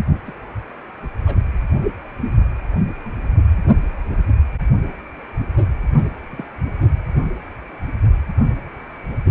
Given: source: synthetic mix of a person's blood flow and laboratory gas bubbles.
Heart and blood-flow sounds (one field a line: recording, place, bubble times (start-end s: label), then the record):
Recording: Doppler ultrasound of blood flow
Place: precordium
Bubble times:
0.26-0.33 s: bubbles
1.27-1.35 s: bubbles
5.96-6.06 s: bubbles
6.31-6.43 s: bubbles
From the record:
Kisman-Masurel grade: 121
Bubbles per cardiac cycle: 1 to 2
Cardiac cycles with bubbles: 10 to 50%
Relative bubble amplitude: barely perceptible (0.100 to 0.250)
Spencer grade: 2 (many but less than half of the cardiac periods contain bubble signals, singularly or in groups)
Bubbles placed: only in the low amplitude regions of the cardiac cycle